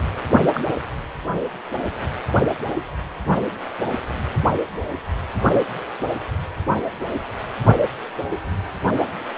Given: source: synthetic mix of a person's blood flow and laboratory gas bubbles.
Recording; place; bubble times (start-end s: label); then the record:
Doppler ultrasound of blood flow; precordium
0.54-0.60 s: bubbles
From the record:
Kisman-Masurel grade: 122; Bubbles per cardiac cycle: 1 to 2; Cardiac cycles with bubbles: 10 to 50%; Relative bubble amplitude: moderate (0.250 to 0.450); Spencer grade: 2 (many but less than half of the cardiac periods contain bubble signals, singularly or in groups); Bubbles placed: only in the low amplitude regions of the cardiac cycle